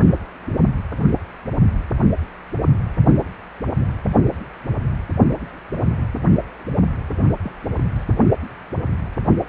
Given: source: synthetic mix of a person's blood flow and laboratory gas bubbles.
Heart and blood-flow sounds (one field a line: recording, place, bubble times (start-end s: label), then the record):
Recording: Doppler ultrasound of blood flow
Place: precordium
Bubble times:
6.73-6.81 s: bubbles
7.43-7.52 s: bubbles
7.75-7.84 s: bubbles
7.95-8.04 s: bubbles
From the record:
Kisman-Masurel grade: 211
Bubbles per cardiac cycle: several, 3 to 8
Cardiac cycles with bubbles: 1 to 10%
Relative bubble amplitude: barely perceptible (0.100 to 0.250)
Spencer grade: 1 (occasional bubble signal discernible with the cardiac motion signal, with majority of cardiac periods free of bubbles)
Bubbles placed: only in the low amplitude regions of the cardiac cycle